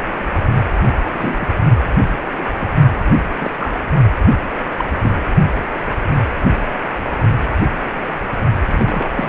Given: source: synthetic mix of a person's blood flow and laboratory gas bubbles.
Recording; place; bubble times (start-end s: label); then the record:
Doppler ultrasound of blood flow; precordium
1.14-1.48 s: bubbles
2.37-2.45 s: bubbles
2.58-2.75 s: bubbles
3.41-3.50 s: bubbles
3.59-3.77 s: bubbles
4.31-4.37 s: bubbles
4.79-4.84 s: bubbles
5.02-5.18 s: bubbles
8.67-9.29 s: bubbles
From the record:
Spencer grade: 2 (many but less than half of the cardiac periods contain bubble signals, singularly or in groups); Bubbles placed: only in the low amplitude regions of the cardiac cycle